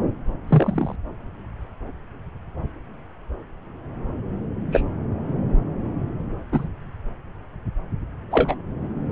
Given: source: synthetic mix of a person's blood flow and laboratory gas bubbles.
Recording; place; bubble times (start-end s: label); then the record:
Doppler ultrasound of blood flow; subclavian vein
0.47-0.95 s: bubbles
4.72-4.83 s: bubbles
6.52-6.68 s: bubbles
8.30-8.56 s: bubbles
From the record:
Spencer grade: 2 (many but less than half of the cardiac periods contain bubble signals, singularly or in groups); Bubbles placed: anywhere in the cardiac cycle